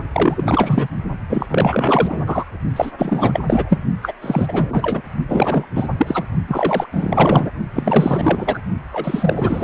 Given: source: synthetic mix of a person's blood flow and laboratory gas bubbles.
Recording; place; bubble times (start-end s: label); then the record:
Doppler ultrasound of blood flow; precordium
0.12-0.88 s: bubbles
1.29-1.46 s: bubbles
1.48-2.44 s: bubbles
2.76-2.92 s: bubbles
2.98-3.80 s: bubbles
4.02-4.12 s: bubbles
4.21-5.01 s: bubbles
5.29-5.67 s: bubbles
5.75-5.86 s: bubbles
5.97-6.23 s: bubbles
6.47-6.86 s: bubbles
6.92-7.50 s: bubbles
7.75-8.59 s: bubbles
8.92-9.64 s: bubbles
From the record:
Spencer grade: 4 (maximum detectable bubble signal sounding continuously throughout systole and diastole of every cardiac period, and overriding the amplitude of the normal cardiac signals); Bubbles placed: only in the low amplitude regions of the cardiac cycle